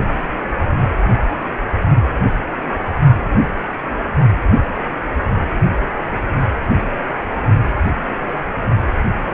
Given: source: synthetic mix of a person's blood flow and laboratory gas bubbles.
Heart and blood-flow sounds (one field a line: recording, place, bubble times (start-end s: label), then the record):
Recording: Doppler ultrasound of blood flow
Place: precordium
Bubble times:
no bubbles
From the record:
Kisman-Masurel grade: 000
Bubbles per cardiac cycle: 0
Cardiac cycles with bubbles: 0%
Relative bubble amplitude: no bubbles discernible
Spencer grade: 0 (complete lack of bubble signals)